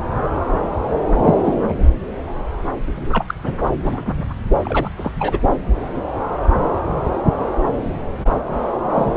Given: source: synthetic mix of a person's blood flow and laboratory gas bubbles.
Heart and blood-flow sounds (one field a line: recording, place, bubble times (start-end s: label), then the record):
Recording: Doppler ultrasound of blood flow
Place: subclavian vein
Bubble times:
1.10-1.55 s: bubbles
1.69-1.73 s: bubbles
2.87-2.92 s: bubbles
2.95-3.25 s: bubbles
3.28-3.35 s: bubbles
3.46-3.59 s: bubbles
3.64-3.68 s: bubbles
3.79-4.25 s: bubbles
4.64-4.91 s: bubbles
4.97-5.12 s: bubbles
5.19-5.39 s: bubbles
8.96-9.17 s: bubbles
From the record:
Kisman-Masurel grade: 222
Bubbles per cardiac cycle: several, 3 to 8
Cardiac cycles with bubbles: 10 to 50%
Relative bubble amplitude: moderate (0.250 to 0.450)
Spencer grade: 2 (many but less than half of the cardiac periods contain bubble signals, singularly or in groups)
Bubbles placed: anywhere in the cardiac cycle